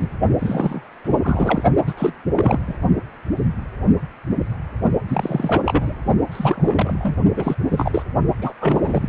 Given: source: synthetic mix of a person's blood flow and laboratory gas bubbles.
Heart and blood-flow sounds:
Doppler ultrasound of blood flow; precordium
0.00-0.10 s: bubbles
0.39-0.82 s: bubbles
1.04-1.17 s: bubbles
1.23-1.64 s: bubbles
1.87-1.94 s: bubbles
1.97-2.13 s: bubbles
2.36-2.59 s: bubbles
2.67-2.74 s: bubbles
5.07-5.62 s: bubbles
5.66-5.96 s: bubbles
6.32-7.16 s: bubbles
7.37-7.54 s: bubbles
7.70-8.03 s: bubbles
8.41-8.53 s: bubbles
8.61-9.09 s: bubbles
From the record:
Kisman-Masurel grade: 332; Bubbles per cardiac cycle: rolling drumbeat, 9 or more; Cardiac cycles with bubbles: 50 to 99%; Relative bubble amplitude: moderate (0.250 to 0.450); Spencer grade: 3 (all of the cardiac periods contain showers or single bubble signals, but not dominating or overriding the cardiac motion signals); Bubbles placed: only in the low amplitude regions of the cardiac cycle

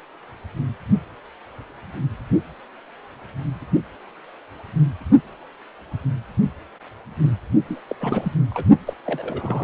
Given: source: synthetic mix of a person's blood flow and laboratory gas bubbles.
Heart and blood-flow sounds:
Doppler ultrasound of blood flow; precordium
7.69-7.79 s: bubbles
7.88-7.96 s: bubbles
8.00-8.37 s: bubbles
8.50-8.65 s: bubbles
8.86-8.93 s: bubbles
9.05-9.64 s: bubbles
From the record:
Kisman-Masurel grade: 221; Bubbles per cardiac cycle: several, 3 to 8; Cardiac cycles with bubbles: 10 to 50%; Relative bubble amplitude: barely perceptible (0.100 to 0.250); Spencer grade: 2 (many but less than half of the cardiac periods contain bubble signals, singularly or in groups); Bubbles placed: only in the low amplitude regions of the cardiac cycle

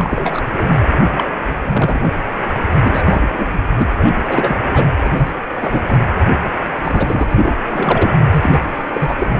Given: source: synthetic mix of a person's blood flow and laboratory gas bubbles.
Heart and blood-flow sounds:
Doppler ultrasound of blood flow; precordium
0.00-0.41 s: bubbles
0.56-0.74 s: bubbles
1.16-1.24 s: bubbles
1.62-2.11 s: bubbles
2.82-3.60 s: bubbles
3.77-3.88 s: bubbles
3.99-4.15 s: bubbles
4.28-4.56 s: bubbles
4.70-4.88 s: bubbles
5.04-5.30 s: bubbles
5.59-5.97 s: bubbles
6.16-6.44 s: bubbles
6.84-7.53 s: bubbles
7.71-8.18 s: bubbles
8.31-8.62 s: bubbles
8.93-9.30 s: bubbles
From the record:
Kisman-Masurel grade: 242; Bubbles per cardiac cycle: several, 3 to 8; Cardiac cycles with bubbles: 100%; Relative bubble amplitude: moderate (0.250 to 0.450); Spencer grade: 3 (all of the cardiac periods contain showers or single bubble signals, but not dominating or overriding the cardiac motion signals); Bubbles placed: anywhere in the cardiac cycle

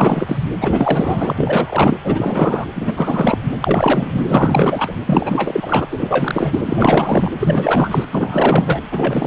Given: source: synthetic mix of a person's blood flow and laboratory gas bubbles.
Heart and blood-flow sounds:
Doppler ultrasound of blood flow; precordium
0.00-0.38 s: bubbles
0.60-1.33 s: bubbles
1.36-1.97 s: bubbles
2.03-2.66 s: bubbles
2.75-3.38 s: bubbles
3.60-4.95 s: bubbles
5.06-5.87 s: bubbles
5.91-7.32 s: bubbles
7.39-8.05 s: bubbles
8.12-8.83 s: bubbles
8.91-9.27 s: bubbles
From the record:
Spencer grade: 4 (maximum detectable bubble signal sounding continuously throughout systole and diastole of every cardiac period, and overriding the amplitude of the normal cardiac signals); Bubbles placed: anywhere in the cardiac cycle

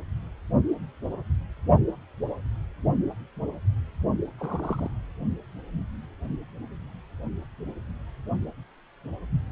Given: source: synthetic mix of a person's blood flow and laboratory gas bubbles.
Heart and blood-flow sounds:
Doppler ultrasound of blood flow; precordium
4.38-4.89 s: bubbles
From the record:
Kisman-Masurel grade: 121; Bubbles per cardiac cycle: 1 to 2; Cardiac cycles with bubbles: 10 to 50%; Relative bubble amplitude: barely perceptible (0.100 to 0.250); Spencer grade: 2 (many but less than half of the cardiac periods contain bubble signals, singularly or in groups); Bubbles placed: anywhere in the cardiac cycle

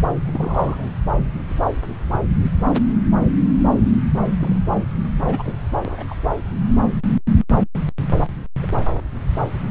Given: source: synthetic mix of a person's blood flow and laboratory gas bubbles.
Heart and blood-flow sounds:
Doppler ultrasound of blood flow; subclavian vein
0.26-0.86 s: bubbles
4.40-4.61 s: bubbles
5.24-5.54 s: bubbles
5.85-6.04 s: bubbles
6.07-6.15 s: bubbles
8.62-8.67 s: bubbles
From the record:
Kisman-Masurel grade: 221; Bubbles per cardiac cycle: several, 3 to 8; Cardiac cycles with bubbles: 10 to 50%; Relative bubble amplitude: barely perceptible (0.100 to 0.250); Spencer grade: 2 (many but less than half of the cardiac periods contain bubble signals, singularly or in groups); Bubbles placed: anywhere in the cardiac cycle

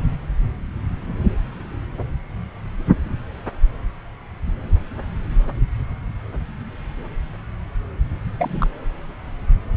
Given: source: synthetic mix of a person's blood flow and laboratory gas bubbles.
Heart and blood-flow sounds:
Doppler ultrasound of blood flow; subclavian vein
8.39-8.68 s: bubbles
From the record:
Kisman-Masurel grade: 112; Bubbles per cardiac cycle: 1 to 2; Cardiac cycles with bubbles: 1 to 10%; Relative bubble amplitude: moderate (0.250 to 0.450); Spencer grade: 1 (occasional bubble signal discernible with the cardiac motion signal, with majority of cardiac periods free of bubbles); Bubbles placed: anywhere in the cardiac cycle

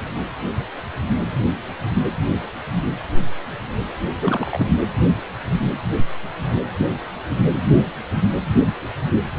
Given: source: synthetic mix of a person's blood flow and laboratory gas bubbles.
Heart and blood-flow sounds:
Doppler ultrasound of blood flow; precordium
4.21-4.67 s: bubbles
From the record:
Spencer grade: 1 (occasional bubble signal discernible with the cardiac motion signal, with majority of cardiac periods free of bubbles); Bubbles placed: anywhere in the cardiac cycle

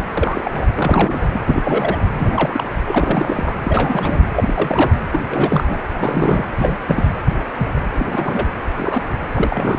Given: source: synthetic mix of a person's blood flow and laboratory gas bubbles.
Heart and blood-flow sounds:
Doppler ultrasound of blood flow; precordium
0.17-0.51 s: bubbles
0.54-0.66 s: bubbles
0.76-1.40 s: bubbles
1.46-2.02 s: bubbles
2.12-2.64 s: bubbles
2.87-3.58 s: bubbles
3.65-4.26 s: bubbles
4.36-4.92 s: bubbles
5.12-5.20 s: bubbles
5.28-5.78 s: bubbles
5.94-6.46 s: bubbles
6.57-6.78 s: bubbles
6.87-7.13 s: bubbles
7.58-7.73 s: bubbles
7.76-7.80 s: bubbles
7.99-8.46 s: bubbles
8.77-9.03 s: bubbles
9.33-9.79 s: bubbles
From the record:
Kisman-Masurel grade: 342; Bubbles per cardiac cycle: rolling drumbeat, 9 or more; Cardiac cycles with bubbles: 100%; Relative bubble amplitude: moderate (0.250 to 0.450); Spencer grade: 3 (all of the cardiac periods contain showers or single bubble signals, but not dominating or overriding the cardiac motion signals); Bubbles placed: anywhere in the cardiac cycle

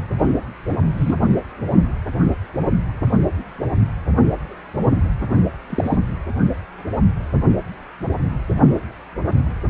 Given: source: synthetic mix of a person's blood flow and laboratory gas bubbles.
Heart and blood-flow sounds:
Doppler ultrasound of blood flow; precordium
0.97-1.16 s: bubbles
5.69-5.97 s: bubbles
From the record:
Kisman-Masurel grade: 122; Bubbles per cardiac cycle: 1 to 2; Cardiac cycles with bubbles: 10 to 50%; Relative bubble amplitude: moderate (0.250 to 0.450); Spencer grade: 2 (many but less than half of the cardiac periods contain bubble signals, singularly or in groups); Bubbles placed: only in the low amplitude regions of the cardiac cycle

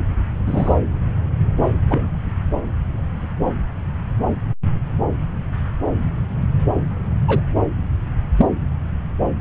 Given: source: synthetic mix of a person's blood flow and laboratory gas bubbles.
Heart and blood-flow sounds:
Doppler ultrasound of blood flow; subclavian vein
0.46-0.76 s: bubbles
1.89-2.08 s: bubbles
7.28-7.41 s: bubbles
8.37-8.46 s: bubbles
9.39-9.41 s: bubbles
From the record:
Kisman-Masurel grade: 123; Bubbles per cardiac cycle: 1 to 2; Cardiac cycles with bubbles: 10 to 50%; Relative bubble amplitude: loud (0.450 to 0.775); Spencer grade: 2 (many but less than half of the cardiac periods contain bubble signals, singularly or in groups); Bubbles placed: anywhere in the cardiac cycle

